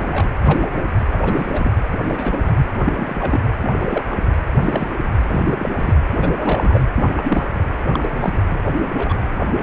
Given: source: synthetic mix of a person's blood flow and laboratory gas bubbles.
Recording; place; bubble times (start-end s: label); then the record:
Doppler ultrasound of blood flow; precordium
0.00-0.29 s: bubbles
0.43-0.68 s: bubbles
1.10-1.72 s: bubbles
1.91-1.97 s: bubbles
2.06-2.55 s: bubbles
2.78-3.41 s: bubbles
3.62-4.04 s: bubbles
4.09-4.17 s: bubbles
4.61-4.90 s: bubbles
5.27-5.54 s: bubbles
5.58-5.69 s: bubbles
5.77-5.94 s: bubbles
6.14-6.81 s: bubbles
6.96-7.13 s: bubbles
7.17-7.46 s: bubbles
7.91-8.42 s: bubbles
8.97-9.15 s: bubbles
9.56-9.63 s: bubbles
From the record:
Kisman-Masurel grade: 232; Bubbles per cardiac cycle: several, 3 to 8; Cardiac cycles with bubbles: 50 to 99%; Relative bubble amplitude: moderate (0.250 to 0.450); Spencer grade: 3 (all of the cardiac periods contain showers or single bubble signals, but not dominating or overriding the cardiac motion signals); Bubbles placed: anywhere in the cardiac cycle